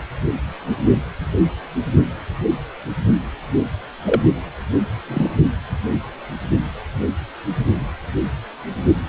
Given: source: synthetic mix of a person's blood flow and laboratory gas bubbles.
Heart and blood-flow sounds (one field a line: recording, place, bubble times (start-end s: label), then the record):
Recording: Doppler ultrasound of blood flow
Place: precordium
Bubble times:
3.54-3.61 s: bubbles
4.05-4.22 s: bubbles
5.08-5.31 s: bubbles
From the record:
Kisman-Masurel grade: 122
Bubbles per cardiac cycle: 1 to 2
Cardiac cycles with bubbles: 10 to 50%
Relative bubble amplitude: moderate (0.250 to 0.450)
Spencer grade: 2 (many but less than half of the cardiac periods contain bubble signals, singularly or in groups)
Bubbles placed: only in the low amplitude regions of the cardiac cycle